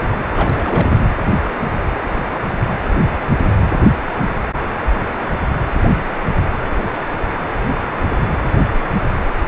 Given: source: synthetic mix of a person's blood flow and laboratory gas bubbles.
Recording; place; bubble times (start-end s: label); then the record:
Doppler ultrasound of blood flow; precordium
0.34-0.99 s: bubbles
From the record:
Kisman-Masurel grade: 211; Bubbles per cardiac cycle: several, 3 to 8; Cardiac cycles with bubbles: 1 to 10%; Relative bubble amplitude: barely perceptible (0.100 to 0.250); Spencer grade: 1 (occasional bubble signal discernible with the cardiac motion signal, with majority of cardiac periods free of bubbles); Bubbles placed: anywhere in the cardiac cycle